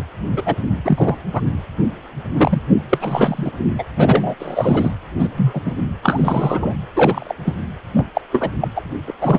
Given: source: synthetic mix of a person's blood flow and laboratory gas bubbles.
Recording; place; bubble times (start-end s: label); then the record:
Doppler ultrasound of blood flow; precordium
0.00-0.03 s: bubbles
0.31-0.43 s: bubbles
0.45-0.55 s: bubbles
0.85-1.17 s: bubbles
1.33-1.41 s: bubbles
2.37-2.62 s: bubbles
2.89-3.51 s: bubbles
3.78-3.84 s: bubbles
3.98-4.35 s: bubbles
4.40-4.91 s: bubbles
5.18-5.29 s: bubbles
5.37-5.62 s: bubbles
5.65-5.72 s: bubbles
6.03-6.74 s: bubbles
6.96-7.33 s: bubbles
7.45-7.56 s: bubbles
7.94-8.05 s: bubbles
8.14-8.21 s: bubbles
8.32-8.50 s: bubbles
8.60-8.68 s: bubbles
8.75-8.81 s: bubbles
9.07-9.14 s: bubbles
9.21-9.39 s: bubbles
From the record:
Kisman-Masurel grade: 243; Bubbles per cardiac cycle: several, 3 to 8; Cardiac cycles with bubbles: 100%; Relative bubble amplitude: loud (0.450 to 0.775); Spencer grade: 3 (all of the cardiac periods contain showers or single bubble signals, but not dominating or overriding the cardiac motion signals); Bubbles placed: anywhere in the cardiac cycle